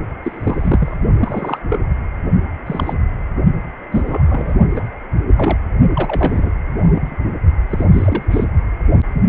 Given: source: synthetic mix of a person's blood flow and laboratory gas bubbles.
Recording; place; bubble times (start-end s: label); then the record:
Doppler ultrasound of blood flow; precordium
0.23-0.95 s: bubbles
1.19-1.59 s: bubbles
1.70-1.79 s: bubbles
2.66-2.94 s: bubbles
3.91-4.24 s: bubbles
4.28-4.56 s: bubbles
4.74-4.88 s: bubbles
5.37-5.58 s: bubbles
5.95-6.52 s: bubbles
6.78-7.16 s: bubbles
7.70-7.86 s: bubbles
7.92-8.45 s: bubbles
9.13-9.22 s: bubbles
From the record:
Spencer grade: 3 (all of the cardiac periods contain showers or single bubble signals, but not dominating or overriding the cardiac motion signals); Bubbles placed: only in the low amplitude regions of the cardiac cycle